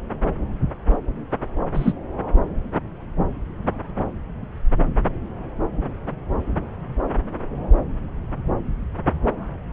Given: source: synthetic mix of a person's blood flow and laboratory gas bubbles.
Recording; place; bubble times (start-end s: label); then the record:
Doppler ultrasound of blood flow; subclavian vein
1.73-1.93 s: bubbles
From the record:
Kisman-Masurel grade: 113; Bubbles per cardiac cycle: 1 to 2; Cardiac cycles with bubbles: 1 to 10%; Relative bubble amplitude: loud (0.450 to 0.775); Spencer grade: 1 (occasional bubble signal discernible with the cardiac motion signal, with majority of cardiac periods free of bubbles); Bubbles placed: anywhere in the cardiac cycle